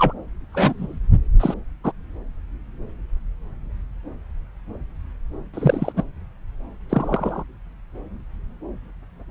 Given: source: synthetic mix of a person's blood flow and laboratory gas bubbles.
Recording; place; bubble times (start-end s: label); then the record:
Doppler ultrasound of blood flow; subclavian vein
0.00-0.13 s: bubbles
0.52-0.98 s: bubbles
1.40-1.54 s: bubbles
1.84-1.92 s: bubbles
5.54-5.92 s: bubbles
5.96-6.03 s: bubbles
6.89-7.44 s: bubbles
From the record:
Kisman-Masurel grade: 123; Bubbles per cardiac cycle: 1 to 2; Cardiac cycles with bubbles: 10 to 50%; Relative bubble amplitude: loud (0.450 to 0.775); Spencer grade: 2 (many but less than half of the cardiac periods contain bubble signals, singularly or in groups); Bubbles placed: anywhere in the cardiac cycle